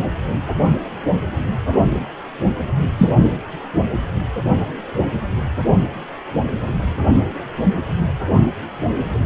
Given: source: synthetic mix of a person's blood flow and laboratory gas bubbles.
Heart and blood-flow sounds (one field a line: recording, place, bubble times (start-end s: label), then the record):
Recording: Doppler ultrasound of blood flow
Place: precordium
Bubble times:
2.98-3.16 s: bubbles
From the record:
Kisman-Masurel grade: 123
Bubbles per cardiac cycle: 1 to 2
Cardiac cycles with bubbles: 10 to 50%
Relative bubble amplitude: loud (0.450 to 0.775)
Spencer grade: 2 (many but less than half of the cardiac periods contain bubble signals, singularly or in groups)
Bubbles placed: anywhere in the cardiac cycle